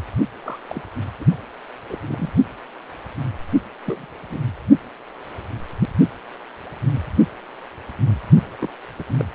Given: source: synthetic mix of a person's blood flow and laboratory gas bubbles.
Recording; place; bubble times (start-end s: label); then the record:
Doppler ultrasound of blood flow; precordium
0.43-0.59 s: bubbles
0.68-0.82 s: bubbles
1.20-1.25 s: bubbles
1.88-1.98 s: bubbles
2.07-2.31 s: bubbles
3.86-4.06 s: bubbles
4.30-4.39 s: bubbles
8.59-8.74 s: bubbles
8.98-9.04 s: bubbles
9.19-9.23 s: bubbles
From the record:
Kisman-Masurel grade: 221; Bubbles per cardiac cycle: several, 3 to 8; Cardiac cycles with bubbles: 10 to 50%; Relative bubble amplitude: barely perceptible (0.100 to 0.250); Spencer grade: 2 (many but less than half of the cardiac periods contain bubble signals, singularly or in groups); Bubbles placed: only in the low amplitude regions of the cardiac cycle